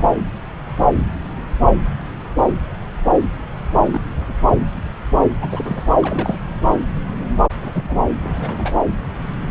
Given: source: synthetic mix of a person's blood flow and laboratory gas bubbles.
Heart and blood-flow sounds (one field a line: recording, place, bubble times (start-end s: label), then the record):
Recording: Doppler ultrasound of blood flow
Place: subclavian vein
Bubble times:
0.00-0.16 s: bubbles
3.91-4.01 s: bubbles
4.11-4.33 s: bubbles
4.50-4.54 s: bubbles
5.42-5.84 s: bubbles
5.99-6.42 s: bubbles
7.61-7.71 s: bubbles
7.75-8.06 s: bubbles
8.21-8.75 s: bubbles
From the record:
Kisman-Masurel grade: 222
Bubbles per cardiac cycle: several, 3 to 8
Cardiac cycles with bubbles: 10 to 50%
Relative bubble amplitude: moderate (0.250 to 0.450)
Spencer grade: 2 (many but less than half of the cardiac periods contain bubble signals, singularly or in groups)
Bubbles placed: anywhere in the cardiac cycle